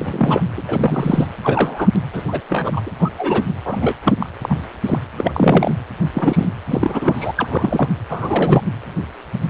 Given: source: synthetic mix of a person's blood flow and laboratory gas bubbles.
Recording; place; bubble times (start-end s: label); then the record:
Doppler ultrasound of blood flow; precordium
0.00-0.42 s: bubbles
0.57-0.63 s: bubbles
0.67-1.27 s: bubbles
1.42-1.88 s: bubbles
1.95-2.02 s: bubbles
2.13-2.24 s: bubbles
2.27-2.41 s: bubbles
2.49-2.81 s: bubbles
2.85-2.92 s: bubbles
2.99-3.10 s: bubbles
3.17-3.45 s: bubbles
3.65-3.96 s: bubbles
4.04-4.14 s: bubbles
4.19-4.29 s: bubbles
4.42-4.58 s: bubbles
4.86-4.99 s: bubbles
5.17-5.75 s: bubbles
6.14-6.49 s: bubbles
6.65-7.32 s: bubbles
7.37-7.47 s: bubbles
7.50-7.90 s: bubbles
8.09-8.62 s: bubbles
From the record:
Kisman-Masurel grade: 233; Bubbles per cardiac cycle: several, 3 to 8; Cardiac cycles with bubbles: 50 to 99%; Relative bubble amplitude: loud (0.450 to 0.775); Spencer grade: 3 (all of the cardiac periods contain showers or single bubble signals, but not dominating or overriding the cardiac motion signals); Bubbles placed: anywhere in the cardiac cycle